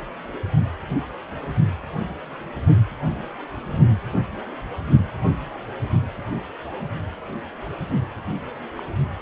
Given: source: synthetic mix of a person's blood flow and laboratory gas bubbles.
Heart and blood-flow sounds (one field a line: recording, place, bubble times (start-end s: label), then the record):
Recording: Doppler ultrasound of blood flow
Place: precordium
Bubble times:
8.76-8.83 s: bubbles
From the record:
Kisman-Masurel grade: 111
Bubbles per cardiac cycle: 1 to 2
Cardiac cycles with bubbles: 1 to 10%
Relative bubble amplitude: barely perceptible (0.100 to 0.250)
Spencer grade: 1 (occasional bubble signal discernible with the cardiac motion signal, with majority of cardiac periods free of bubbles)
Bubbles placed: anywhere in the cardiac cycle